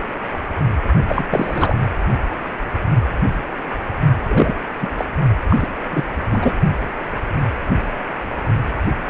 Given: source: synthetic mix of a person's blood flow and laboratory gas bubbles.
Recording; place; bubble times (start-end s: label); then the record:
Doppler ultrasound of blood flow; precordium
1.07-1.25 s: bubbles
1.30-1.77 s: bubbles
4.21-4.56 s: bubbles
4.81-4.90 s: bubbles
4.97-5.04 s: bubbles
5.49-5.56 s: bubbles
5.59-5.68 s: bubbles
5.93-6.04 s: bubbles
6.32-6.54 s: bubbles
From the record:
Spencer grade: 3 (all of the cardiac periods contain showers or single bubble signals, but not dominating or overriding the cardiac motion signals); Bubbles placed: only in the low amplitude regions of the cardiac cycle